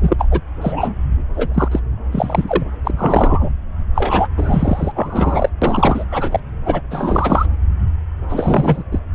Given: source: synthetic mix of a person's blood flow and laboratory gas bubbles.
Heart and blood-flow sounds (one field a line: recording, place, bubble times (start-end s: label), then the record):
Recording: Doppler ultrasound of blood flow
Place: subclavian vein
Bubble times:
0.00-0.28 s: bubbles
0.30-0.40 s: bubbles
0.61-0.94 s: bubbles
1.35-1.68 s: bubbles
1.71-1.80 s: bubbles
2.12-2.63 s: bubbles
2.84-2.91 s: bubbles
2.97-3.50 s: bubbles
3.95-4.27 s: bubbles
4.37-4.92 s: bubbles
4.95-5.49 s: bubbles
5.62-6.04 s: bubbles
6.11-6.40 s: bubbles
6.66-6.81 s: bubbles
6.91-7.46 s: bubbles
8.29-8.84 s: bubbles
8.92-9.00 s: bubbles
From the record:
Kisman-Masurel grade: 343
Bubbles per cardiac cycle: rolling drumbeat, 9 or more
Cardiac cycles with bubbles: 100%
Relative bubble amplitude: loud (0.450 to 0.775)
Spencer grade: 3 (all of the cardiac periods contain showers or single bubble signals, but not dominating or overriding the cardiac motion signals)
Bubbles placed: anywhere in the cardiac cycle